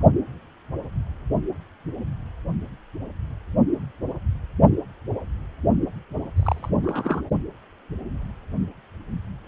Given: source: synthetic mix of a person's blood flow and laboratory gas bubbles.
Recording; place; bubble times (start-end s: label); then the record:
Doppler ultrasound of blood flow; precordium
6.36-6.70 s: bubbles
6.83-7.22 s: bubbles
From the record:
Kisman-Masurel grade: 112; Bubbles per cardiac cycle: 1 to 2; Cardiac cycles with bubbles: 1 to 10%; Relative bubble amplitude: moderate (0.250 to 0.450); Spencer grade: 1 (occasional bubble signal discernible with the cardiac motion signal, with majority of cardiac periods free of bubbles); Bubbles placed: only in the low amplitude regions of the cardiac cycle